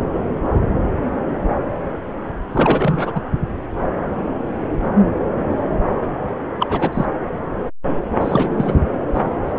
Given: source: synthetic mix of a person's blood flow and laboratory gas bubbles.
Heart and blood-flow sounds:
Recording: Doppler ultrasound of blood flow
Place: subclavian vein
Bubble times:
2.52-3.21 s: bubbles
6.59-7.05 s: bubbles
8.21-8.76 s: bubbles
9.14-9.21 s: bubbles
9.46-9.53 s: bubbles
From the record:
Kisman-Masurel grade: 222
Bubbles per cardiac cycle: several, 3 to 8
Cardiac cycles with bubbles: 10 to 50%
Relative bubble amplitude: moderate (0.250 to 0.450)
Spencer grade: 2 (many but less than half of the cardiac periods contain bubble signals, singularly or in groups)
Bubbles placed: anywhere in the cardiac cycle

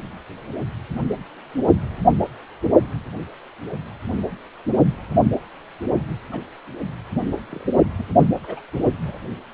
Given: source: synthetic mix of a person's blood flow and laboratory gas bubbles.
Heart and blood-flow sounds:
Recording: Doppler ultrasound of blood flow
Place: precordium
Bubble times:
6.31-6.40 s: bubbles
7.49-7.67 s: bubbles
7.99-8.04 s: bubbles
8.43-8.60 s: bubbles
9.05-9.19 s: bubbles
From the record:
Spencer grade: 2 (many but less than half of the cardiac periods contain bubble signals, singularly or in groups)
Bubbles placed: only in the low amplitude regions of the cardiac cycle

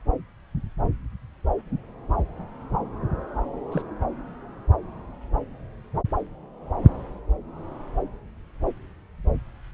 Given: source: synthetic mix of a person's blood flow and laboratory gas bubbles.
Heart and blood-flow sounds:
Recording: Doppler ultrasound of blood flow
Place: subclavian vein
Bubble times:
3.71-3.82 s: bubbles
From the record:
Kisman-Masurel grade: 111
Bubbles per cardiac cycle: 1 to 2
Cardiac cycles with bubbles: 1 to 10%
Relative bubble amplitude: barely perceptible (0.100 to 0.250)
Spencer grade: 1 (occasional bubble signal discernible with the cardiac motion signal, with majority of cardiac periods free of bubbles)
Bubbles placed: anywhere in the cardiac cycle

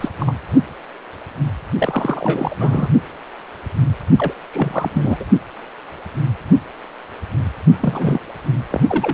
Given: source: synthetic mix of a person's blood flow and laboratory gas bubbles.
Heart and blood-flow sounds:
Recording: Doppler ultrasound of blood flow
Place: precordium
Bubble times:
0.00-0.09 s: bubbles
0.19-0.35 s: bubbles
1.78-2.90 s: bubbles
4.17-4.33 s: bubbles
4.53-5.25 s: bubbles
7.80-8.21 s: bubbles
8.71-8.81 s: bubbles
8.88-9.14 s: bubbles
From the record:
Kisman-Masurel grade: 332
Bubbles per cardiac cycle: rolling drumbeat, 9 or more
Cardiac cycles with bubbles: 50 to 99%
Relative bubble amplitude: moderate (0.250 to 0.450)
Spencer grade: 3 (all of the cardiac periods contain showers or single bubble signals, but not dominating or overriding the cardiac motion signals)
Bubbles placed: only in the low amplitude regions of the cardiac cycle

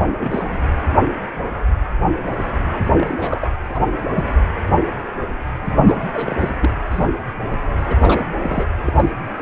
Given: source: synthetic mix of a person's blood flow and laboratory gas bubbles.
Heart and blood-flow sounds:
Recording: Doppler ultrasound of blood flow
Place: precordium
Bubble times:
0.00-0.58 s: bubbles
2.97-3.17 s: bubbles
3.21-3.47 s: bubbles
3.68-3.79 s: bubbles
4.16-4.23 s: bubbles
5.81-5.95 s: bubbles
6.14-6.50 s: bubbles
6.61-6.70 s: bubbles
6.91-7.12 s: bubbles
7.51-7.57 s: bubbles
7.86-7.96 s: bubbles
8.02-8.23 s: bubbles
8.41-8.65 s: bubbles
8.85-8.93 s: bubbles
8.96-9.12 s: bubbles
9.38-9.42 s: bubbles
From the record:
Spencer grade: 3 (all of the cardiac periods contain showers or single bubble signals, but not dominating or overriding the cardiac motion signals)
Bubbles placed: anywhere in the cardiac cycle

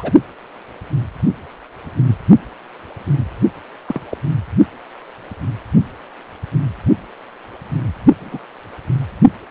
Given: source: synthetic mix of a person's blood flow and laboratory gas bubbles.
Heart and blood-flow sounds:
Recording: Doppler ultrasound of blood flow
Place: precordium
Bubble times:
0.00-0.12 s: bubbles
3.88-4.01 s: bubbles
4.11-4.18 s: bubbles
8.20-8.39 s: bubbles
From the record:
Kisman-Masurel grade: 122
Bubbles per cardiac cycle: 1 to 2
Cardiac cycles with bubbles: 10 to 50%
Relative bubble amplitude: moderate (0.250 to 0.450)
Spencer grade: 2 (many but less than half of the cardiac periods contain bubble signals, singularly or in groups)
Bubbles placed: anywhere in the cardiac cycle

